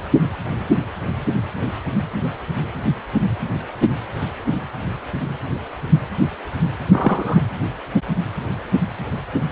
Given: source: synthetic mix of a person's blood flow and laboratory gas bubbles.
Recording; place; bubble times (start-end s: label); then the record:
Doppler ultrasound of blood flow; precordium
6.91-7.41 s: bubbles
From the record:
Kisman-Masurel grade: 113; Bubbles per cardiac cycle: 1 to 2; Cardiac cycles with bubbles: 1 to 10%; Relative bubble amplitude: loud (0.450 to 0.775); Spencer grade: 1 (occasional bubble signal discernible with the cardiac motion signal, with majority of cardiac periods free of bubbles); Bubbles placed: anywhere in the cardiac cycle